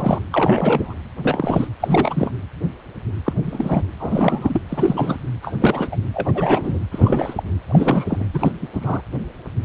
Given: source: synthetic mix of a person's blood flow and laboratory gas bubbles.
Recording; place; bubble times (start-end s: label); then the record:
Doppler ultrasound of blood flow; precordium
0.00-0.20 s: bubbles
0.32-0.93 s: bubbles
1.23-1.67 s: bubbles
1.80-2.31 s: bubbles
3.25-3.33 s: bubbles
3.42-3.83 s: bubbles
4.00-4.61 s: bubbles
4.69-5.18 s: bubbles
5.42-5.54 s: bubbles
5.58-5.89 s: bubbles
5.92-5.96 s: bubbles
6.13-6.79 s: bubbles
6.92-7.43 s: bubbles
7.67-8.27 s: bubbles
8.33-8.53 s: bubbles
8.62-8.68 s: bubbles
8.73-9.02 s: bubbles
From the record:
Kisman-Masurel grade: 332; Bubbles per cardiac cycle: rolling drumbeat, 9 or more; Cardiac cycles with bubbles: 50 to 99%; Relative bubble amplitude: moderate (0.250 to 0.450); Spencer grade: 3 (all of the cardiac periods contain showers or single bubble signals, but not dominating or overriding the cardiac motion signals); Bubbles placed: anywhere in the cardiac cycle